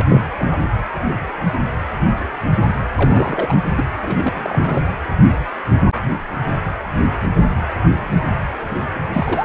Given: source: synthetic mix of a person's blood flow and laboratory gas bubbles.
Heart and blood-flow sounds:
Doppler ultrasound of blood flow; precordium
0.00-0.05 s: bubbles
0.10-0.26 s: bubbles
0.37-0.59 s: bubbles
2.96-3.55 s: bubbles
3.75-3.85 s: bubbles
4.00-4.92 s: bubbles
9.12-9.45 s: bubbles
From the record:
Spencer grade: 2 (many but less than half of the cardiac periods contain bubble signals, singularly or in groups); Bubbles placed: anywhere in the cardiac cycle

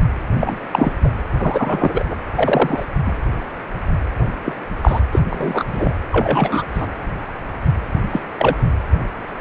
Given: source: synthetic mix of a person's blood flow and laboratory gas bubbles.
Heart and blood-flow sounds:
Doppler ultrasound of blood flow; precordium
0.33-0.58 s: bubbles
0.72-0.92 s: bubbles
1.03-1.09 s: bubbles
1.38-2.04 s: bubbles
2.09-2.17 s: bubbles
2.35-2.86 s: bubbles
3.05-3.17 s: bubbles
4.45-4.54 s: bubbles
4.82-5.00 s: bubbles
5.12-5.20 s: bubbles
5.30-5.64 s: bubbles
5.73-5.94 s: bubbles
6.12-6.63 s: bubbles
6.74-6.87 s: bubbles
8.10-8.21 s: bubbles
8.38-8.56 s: bubbles
From the record:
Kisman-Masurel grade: 233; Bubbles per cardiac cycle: several, 3 to 8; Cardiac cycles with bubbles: 50 to 99%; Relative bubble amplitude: loud (0.450 to 0.775); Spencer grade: 3 (all of the cardiac periods contain showers or single bubble signals, but not dominating or overriding the cardiac motion signals); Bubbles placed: anywhere in the cardiac cycle

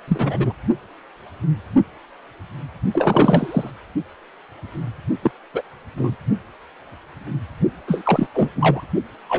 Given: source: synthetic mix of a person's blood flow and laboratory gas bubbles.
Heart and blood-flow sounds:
Doppler ultrasound of blood flow; precordium
0.07-0.54 s: bubbles
2.93-3.71 s: bubbles
5.22-5.31 s: bubbles
5.54-5.62 s: bubbles
5.97-6.16 s: bubbles
7.87-8.28 s: bubbles
8.34-8.49 s: bubbles
8.55-8.84 s: bubbles
9.29-9.39 s: bubbles
From the record:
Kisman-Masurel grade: 233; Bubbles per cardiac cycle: several, 3 to 8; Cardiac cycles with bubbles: 50 to 99%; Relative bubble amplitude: loud (0.450 to 0.775); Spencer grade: 3 (all of the cardiac periods contain showers or single bubble signals, but not dominating or overriding the cardiac motion signals); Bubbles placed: only in the low amplitude regions of the cardiac cycle

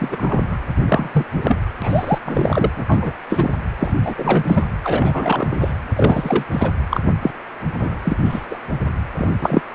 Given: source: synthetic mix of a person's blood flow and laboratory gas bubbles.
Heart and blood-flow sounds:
Doppler ultrasound of blood flow; precordium
0.00-0.57 s: bubbles
0.86-1.10 s: bubbles
1.13-1.25 s: bubbles
1.29-1.58 s: bubbles
1.82-2.19 s: bubbles
2.25-2.70 s: bubbles
2.76-2.84 s: bubbles
2.88-3.14 s: bubbles
3.29-3.52 s: bubbles
3.79-3.92 s: bubbles
4.04-4.44 s: bubbles
4.47-4.64 s: bubbles
4.83-5.48 s: bubbles
5.51-5.74 s: bubbles
5.93-6.45 s: bubbles
6.50-6.70 s: bubbles
6.89-7.00 s: bubbles
7.21-7.31 s: bubbles
7.79-7.98 s: bubbles
8.03-8.17 s: bubbles
8.25-8.46 s: bubbles
8.50-8.58 s: bubbles
9.18-9.27 s: bubbles
9.41-9.63 s: bubbles
From the record:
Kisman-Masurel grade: 243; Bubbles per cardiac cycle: several, 3 to 8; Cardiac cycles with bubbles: 100%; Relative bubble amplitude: loud (0.450 to 0.775); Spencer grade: 3 (all of the cardiac periods contain showers or single bubble signals, but not dominating or overriding the cardiac motion signals); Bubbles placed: anywhere in the cardiac cycle

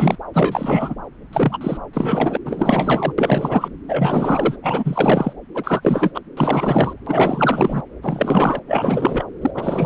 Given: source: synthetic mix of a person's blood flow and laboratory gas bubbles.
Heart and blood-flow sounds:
Doppler ultrasound of blood flow; subclavian vein
0.00-0.16 s: bubbles
0.34-0.94 s: bubbles
1.32-1.77 s: bubbles
1.93-2.37 s: bubbles
2.45-3.13 s: bubbles
3.18-3.69 s: bubbles
3.88-4.56 s: bubbles
4.62-5.33 s: bubbles
5.54-6.11 s: bubbles
6.14-6.21 s: bubbles
6.36-6.93 s: bubbles
7.07-7.83 s: bubbles
8.02-8.59 s: bubbles
8.67-9.24 s: bubbles
9.42-9.51 s: bubbles
9.54-9.86 s: bubbles
From the record:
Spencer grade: 4 (maximum detectable bubble signal sounding continuously throughout systole and diastole of every cardiac period, and overriding the amplitude of the normal cardiac signals); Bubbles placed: anywhere in the cardiac cycle

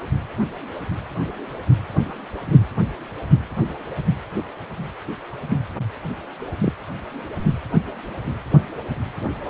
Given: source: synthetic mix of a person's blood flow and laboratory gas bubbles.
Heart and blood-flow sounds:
Doppler ultrasound of blood flow; precordium
6.61-6.73 s: bubbles
From the record:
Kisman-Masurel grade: 112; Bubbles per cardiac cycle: 1 to 2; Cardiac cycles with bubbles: 1 to 10%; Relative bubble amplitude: moderate (0.250 to 0.450); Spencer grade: 1 (occasional bubble signal discernible with the cardiac motion signal, with majority of cardiac periods free of bubbles); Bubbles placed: anywhere in the cardiac cycle

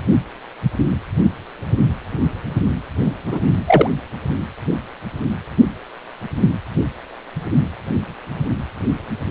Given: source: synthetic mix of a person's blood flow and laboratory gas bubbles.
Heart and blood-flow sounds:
Doppler ultrasound of blood flow; precordium
3.27-3.41 s: bubbles
3.50-3.58 s: bubbles
3.67-3.89 s: bubbles
From the record:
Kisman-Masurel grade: 213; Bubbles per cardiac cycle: several, 3 to 8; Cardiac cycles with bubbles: 1 to 10%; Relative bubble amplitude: loud (0.450 to 0.775); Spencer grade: 1 (occasional bubble signal discernible with the cardiac motion signal, with majority of cardiac periods free of bubbles); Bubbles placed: anywhere in the cardiac cycle

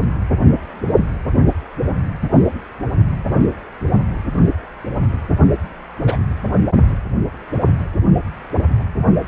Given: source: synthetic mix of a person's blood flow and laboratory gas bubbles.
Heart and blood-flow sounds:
Doppler ultrasound of blood flow; precordium
6.06-6.17 s: bubbles
From the record:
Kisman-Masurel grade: 112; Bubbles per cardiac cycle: 1 to 2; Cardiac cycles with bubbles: 1 to 10%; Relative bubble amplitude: moderate (0.250 to 0.450); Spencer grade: 1 (occasional bubble signal discernible with the cardiac motion signal, with majority of cardiac periods free of bubbles); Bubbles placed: only in the low amplitude regions of the cardiac cycle

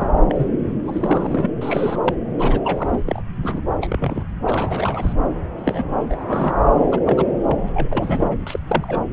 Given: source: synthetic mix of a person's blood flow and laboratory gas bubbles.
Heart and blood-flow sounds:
Doppler ultrasound of blood flow; subclavian vein
0.00-0.07 s: bubbles
0.29-0.47 s: bubbles
0.85-1.50 s: bubbles
1.61-2.02 s: bubbles
2.06-2.15 s: bubbles
2.38-2.60 s: bubbles
2.64-3.03 s: bubbles
3.06-3.22 s: bubbles
3.43-3.62 s: bubbles
3.80-4.24 s: bubbles
4.45-5.13 s: bubbles
5.58-5.84 s: bubbles
6.04-6.24 s: bubbles
6.27-6.54 s: bubbles
6.92-7.00 s: bubbles
7.05-7.28 s: bubbles
7.46-7.58 s: bubbles
7.74-8.26 s: bubbles
8.29-8.37 s: bubbles
8.46-8.59 s: bubbles
8.66-9.01 s: bubbles
From the record:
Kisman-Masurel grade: 242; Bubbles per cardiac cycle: several, 3 to 8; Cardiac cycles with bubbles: 100%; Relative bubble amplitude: moderate (0.250 to 0.450); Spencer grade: 3 (all of the cardiac periods contain showers or single bubble signals, but not dominating or overriding the cardiac motion signals); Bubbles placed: anywhere in the cardiac cycle

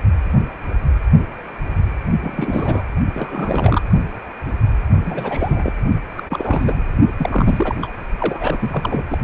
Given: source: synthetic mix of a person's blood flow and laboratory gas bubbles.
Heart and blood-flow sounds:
Doppler ultrasound of blood flow; precordium
2.21-2.84 s: bubbles
3.14-3.82 s: bubbles
5.05-5.72 s: bubbles
6.17-6.22 s: bubbles
6.29-6.86 s: bubbles
7.18-7.75 s: bubbles
7.81-7.88 s: bubbles
8.19-9.04 s: bubbles
9.10-9.18 s: bubbles
From the record:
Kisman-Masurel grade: 332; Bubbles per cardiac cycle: rolling drumbeat, 9 or more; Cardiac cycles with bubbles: 50 to 99%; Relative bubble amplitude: moderate (0.250 to 0.450); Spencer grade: 3 (all of the cardiac periods contain showers or single bubble signals, but not dominating or overriding the cardiac motion signals); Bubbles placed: only in the low amplitude regions of the cardiac cycle

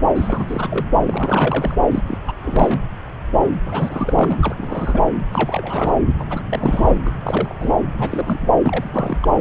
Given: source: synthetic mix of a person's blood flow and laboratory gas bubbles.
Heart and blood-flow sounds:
Doppler ultrasound of blood flow; subclavian vein
0.15-0.67 s: bubbles
0.70-0.85 s: bubbles
1.07-1.75 s: bubbles
1.91-2.03 s: bubbles
2.07-2.17 s: bubbles
2.26-2.32 s: bubbles
2.42-2.80 s: bubbles
3.66-4.37 s: bubbles
4.41-4.55 s: bubbles
4.58-5.02 s: bubbles
5.31-5.93 s: bubbles
6.19-6.24 s: bubbles
6.29-6.43 s: bubbles
6.49-6.97 s: bubbles
7.05-7.10 s: bubbles
7.25-7.54 s: bubbles
7.59-7.70 s: bubbles
7.93-8.53 s: bubbles
8.62-9.17 s: bubbles
9.21-9.37 s: bubbles
From the record:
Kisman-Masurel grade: 332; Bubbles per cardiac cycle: rolling drumbeat, 9 or more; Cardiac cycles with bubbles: 50 to 99%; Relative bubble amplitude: moderate (0.250 to 0.450); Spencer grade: 3 (all of the cardiac periods contain showers or single bubble signals, but not dominating or overriding the cardiac motion signals); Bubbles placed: anywhere in the cardiac cycle

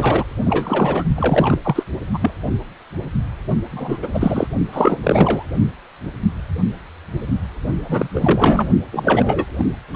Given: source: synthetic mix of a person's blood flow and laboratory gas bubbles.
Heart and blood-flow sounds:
Doppler ultrasound of blood flow; precordium
0.00-0.24 s: bubbles
0.44-1.05 s: bubbles
1.16-1.83 s: bubbles
2.13-2.31 s: bubbles
3.71-4.08 s: bubbles
4.13-4.47 s: bubbles
4.73-5.46 s: bubbles
7.84-8.08 s: bubbles
8.14-8.69 s: bubbles
8.92-9.45 s: bubbles
9.58-9.65 s: bubbles
9.94-9.96 s: bubbles
From the record:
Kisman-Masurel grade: 333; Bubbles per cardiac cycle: rolling drumbeat, 9 or more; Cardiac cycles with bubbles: 50 to 99%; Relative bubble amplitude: loud (0.450 to 0.775); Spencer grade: 3 (all of the cardiac periods contain showers or single bubble signals, but not dominating or overriding the cardiac motion signals); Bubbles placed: only in the low amplitude regions of the cardiac cycle

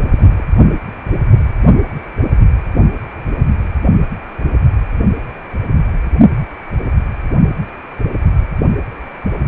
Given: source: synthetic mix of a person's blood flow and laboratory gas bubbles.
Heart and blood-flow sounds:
Doppler ultrasound of blood flow; precordium
0.00-0.11 s: bubbles
0.14-0.42 s: bubbles
From the record:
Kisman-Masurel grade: 211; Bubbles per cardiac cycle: several, 3 to 8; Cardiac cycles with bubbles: 1 to 10%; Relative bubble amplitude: barely perceptible (0.100 to 0.250); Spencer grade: 1 (occasional bubble signal discernible with the cardiac motion signal, with majority of cardiac periods free of bubbles); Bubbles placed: only in the low amplitude regions of the cardiac cycle

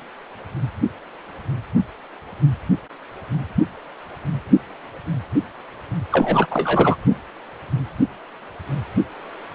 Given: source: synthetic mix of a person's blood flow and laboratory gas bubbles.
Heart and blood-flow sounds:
Doppler ultrasound of blood flow; precordium
6.12-6.97 s: bubbles
From the record:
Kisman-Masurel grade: 213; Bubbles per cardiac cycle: several, 3 to 8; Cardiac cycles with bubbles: 1 to 10%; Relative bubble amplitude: loud (0.450 to 0.775); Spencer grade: 1 (occasional bubble signal discernible with the cardiac motion signal, with majority of cardiac periods free of bubbles); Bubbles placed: only in the low amplitude regions of the cardiac cycle

